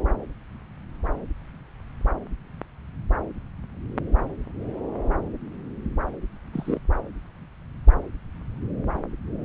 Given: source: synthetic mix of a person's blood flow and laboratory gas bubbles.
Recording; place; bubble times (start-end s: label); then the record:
Doppler ultrasound of blood flow; subclavian vein
6.53-6.79 s: bubbles
From the record:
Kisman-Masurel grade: 113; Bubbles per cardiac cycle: 1 to 2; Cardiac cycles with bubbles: 1 to 10%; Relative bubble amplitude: loud (0.450 to 0.775); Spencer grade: 1 (occasional bubble signal discernible with the cardiac motion signal, with majority of cardiac periods free of bubbles); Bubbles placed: anywhere in the cardiac cycle